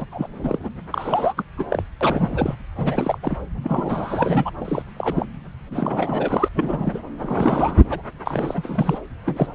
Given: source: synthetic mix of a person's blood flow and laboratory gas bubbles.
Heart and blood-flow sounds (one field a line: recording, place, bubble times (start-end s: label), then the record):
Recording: Doppler ultrasound of blood flow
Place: subclavian vein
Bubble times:
0.00-0.05 s: bubbles
0.11-0.27 s: bubbles
0.38-0.70 s: bubbles
0.91-1.44 s: bubbles
1.56-1.66 s: bubbles
1.70-1.82 s: bubbles
2.00-2.55 s: bubbles
2.77-3.18 s: bubbles
3.23-3.38 s: bubbles
3.63-4.50 s: bubbles
4.60-4.83 s: bubbles
4.96-5.26 s: bubbles
5.68-6.49 s: bubbles
6.54-7.00 s: bubbles
7.21-7.83 s: bubbles
7.90-8.02 s: bubbles
8.26-8.99 s: bubbles
9.26-9.52 s: bubbles
From the record:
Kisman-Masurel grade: 342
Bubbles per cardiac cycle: rolling drumbeat, 9 or more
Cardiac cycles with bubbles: 100%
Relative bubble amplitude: moderate (0.250 to 0.450)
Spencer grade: 3 (all of the cardiac periods contain showers or single bubble signals, but not dominating or overriding the cardiac motion signals)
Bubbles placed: anywhere in the cardiac cycle